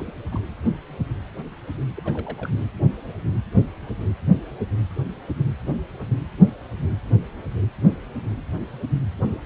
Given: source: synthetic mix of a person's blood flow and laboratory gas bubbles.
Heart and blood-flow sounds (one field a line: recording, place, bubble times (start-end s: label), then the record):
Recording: Doppler ultrasound of blood flow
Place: precordium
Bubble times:
0.00-0.14 s: bubbles
0.31-0.40 s: bubbles
1.96-2.01 s: bubbles
2.04-2.50 s: bubbles
From the record:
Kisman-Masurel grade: 221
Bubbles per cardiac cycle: several, 3 to 8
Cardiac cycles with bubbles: 10 to 50%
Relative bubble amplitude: barely perceptible (0.100 to 0.250)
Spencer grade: 2 (many but less than half of the cardiac periods contain bubble signals, singularly or in groups)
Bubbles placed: anywhere in the cardiac cycle